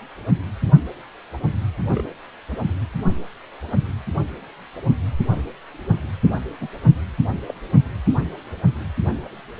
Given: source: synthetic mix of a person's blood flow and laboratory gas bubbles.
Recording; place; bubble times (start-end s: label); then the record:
Doppler ultrasound of blood flow; precordium
1.93-2.12 s: bubbles
2.51-2.56 s: bubbles
6.61-6.67 s: bubbles
7.46-7.53 s: bubbles
From the record:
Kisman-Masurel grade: 121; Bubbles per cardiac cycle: 1 to 2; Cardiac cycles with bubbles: 10 to 50%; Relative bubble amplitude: barely perceptible (0.100 to 0.250); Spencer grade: 2 (many but less than half of the cardiac periods contain bubble signals, singularly or in groups); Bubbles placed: anywhere in the cardiac cycle